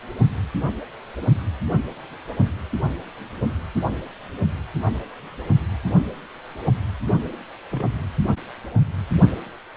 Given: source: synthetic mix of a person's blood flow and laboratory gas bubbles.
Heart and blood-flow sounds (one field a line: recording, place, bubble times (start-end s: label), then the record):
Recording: Doppler ultrasound of blood flow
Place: precordium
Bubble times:
7.71-7.85 s: bubbles
From the record:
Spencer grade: 1 (occasional bubble signal discernible with the cardiac motion signal, with majority of cardiac periods free of bubbles)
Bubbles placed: anywhere in the cardiac cycle